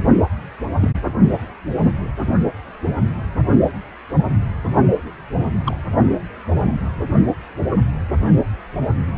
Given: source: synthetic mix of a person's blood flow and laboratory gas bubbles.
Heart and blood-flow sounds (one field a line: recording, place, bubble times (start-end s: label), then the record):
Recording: Doppler ultrasound of blood flow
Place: precordium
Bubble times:
0.80-0.90 s: bubbles
5.65-5.76 s: bubbles
From the record:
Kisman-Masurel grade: 122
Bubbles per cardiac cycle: 1 to 2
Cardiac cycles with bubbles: 10 to 50%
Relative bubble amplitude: moderate (0.250 to 0.450)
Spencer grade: 2 (many but less than half of the cardiac periods contain bubble signals, singularly or in groups)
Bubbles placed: only in the low amplitude regions of the cardiac cycle